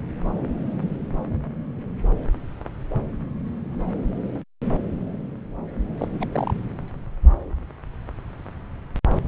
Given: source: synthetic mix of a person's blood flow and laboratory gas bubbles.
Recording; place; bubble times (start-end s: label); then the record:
Doppler ultrasound of blood flow; subclavian vein
5.97-6.08 s: bubbles
6.12-6.27 s: bubbles
6.32-6.54 s: bubbles
From the record:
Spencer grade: 1 (occasional bubble signal discernible with the cardiac motion signal, with majority of cardiac periods free of bubbles); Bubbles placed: anywhere in the cardiac cycle